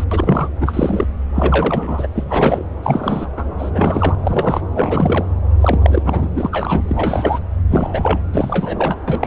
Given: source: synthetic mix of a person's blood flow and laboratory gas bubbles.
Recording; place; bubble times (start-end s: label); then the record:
Doppler ultrasound of blood flow; subclavian vein
0.00-0.04 s: bubbles
0.11-0.49 s: bubbles
0.60-1.06 s: bubbles
1.34-2.07 s: bubbles
2.15-2.24 s: bubbles
2.28-2.64 s: bubbles
2.82-3.29 s: bubbles
3.36-3.43 s: bubbles
3.58-3.70 s: bubbles
3.74-4.15 s: bubbles
4.25-4.60 s: bubbles
4.75-5.26 s: bubbles
5.60-6.29 s: bubbles
6.34-6.82 s: bubbles
6.88-7.39 s: bubbles
7.68-8.20 s: bubbles
8.33-8.99 s: bubbles
9.08-9.27 s: bubbles
From the record:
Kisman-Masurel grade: 343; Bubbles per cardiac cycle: rolling drumbeat, 9 or more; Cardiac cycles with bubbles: 100%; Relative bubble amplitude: loud (0.450 to 0.775); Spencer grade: 3 (all of the cardiac periods contain showers or single bubble signals, but not dominating or overriding the cardiac motion signals); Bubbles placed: anywhere in the cardiac cycle